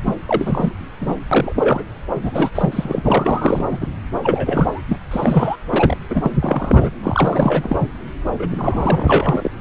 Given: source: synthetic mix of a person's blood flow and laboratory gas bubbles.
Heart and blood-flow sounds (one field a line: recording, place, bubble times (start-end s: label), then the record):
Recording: Doppler ultrasound of blood flow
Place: subclavian vein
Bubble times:
0.04-0.15 s: bubbles
0.26-0.72 s: bubbles
1.01-1.16 s: bubbles
1.31-1.83 s: bubbles
2.14-2.50 s: bubbles
2.54-3.02 s: bubbles
3.04-3.87 s: bubbles
4.13-4.82 s: bubbles
4.88-4.97 s: bubbles
5.11-5.57 s: bubbles
5.72-5.97 s: bubbles
6.09-6.90 s: bubbles
7.03-7.77 s: bubbles
8.39-8.47 s: bubbles
8.52-9.51 s: bubbles
From the record:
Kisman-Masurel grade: 342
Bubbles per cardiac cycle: rolling drumbeat, 9 or more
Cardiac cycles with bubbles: 100%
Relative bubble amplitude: moderate (0.250 to 0.450)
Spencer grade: 3 (all of the cardiac periods contain showers or single bubble signals, but not dominating or overriding the cardiac motion signals)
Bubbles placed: anywhere in the cardiac cycle